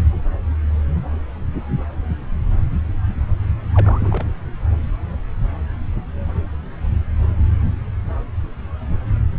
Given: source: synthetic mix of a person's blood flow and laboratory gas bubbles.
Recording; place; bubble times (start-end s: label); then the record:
Doppler ultrasound of blood flow; subclavian vein
3.74-4.26 s: bubbles
From the record:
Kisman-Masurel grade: 221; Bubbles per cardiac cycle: several, 3 to 8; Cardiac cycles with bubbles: 10 to 50%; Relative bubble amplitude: barely perceptible (0.100 to 0.250); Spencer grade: 2 (many but less than half of the cardiac periods contain bubble signals, singularly or in groups); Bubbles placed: anywhere in the cardiac cycle